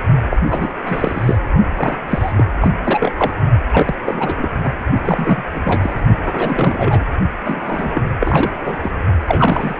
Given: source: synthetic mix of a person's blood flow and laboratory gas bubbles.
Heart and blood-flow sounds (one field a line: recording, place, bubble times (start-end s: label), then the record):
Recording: Doppler ultrasound of blood flow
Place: precordium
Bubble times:
0.30-0.37 s: bubbles
0.49-0.70 s: bubbles
0.85-1.38 s: bubbles
1.76-1.98 s: bubbles
2.09-2.32 s: bubbles
2.38-2.47 s: bubbles
2.60-2.71 s: bubbles
2.83-3.12 s: bubbles
3.17-3.31 s: bubbles
3.72-3.94 s: bubbles
4.06-4.35 s: bubbles
4.38-4.49 s: bubbles
4.63-4.70 s: bubbles
5.04-5.43 s: bubbles
5.54-5.61 s: bubbles
5.64-5.90 s: bubbles
6.25-7.06 s: bubbles
7.46-7.91 s: bubbles
7.94-8.02 s: bubbles
8.20-8.52 s: bubbles
8.64-8.76 s: bubbles
8.83-8.92 s: bubbles
9.27-9.80 s: bubbles
From the record:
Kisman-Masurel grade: 342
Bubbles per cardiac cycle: rolling drumbeat, 9 or more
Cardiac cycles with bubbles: 100%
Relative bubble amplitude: moderate (0.250 to 0.450)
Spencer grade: 3 (all of the cardiac periods contain showers or single bubble signals, but not dominating or overriding the cardiac motion signals)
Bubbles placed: only in the low amplitude regions of the cardiac cycle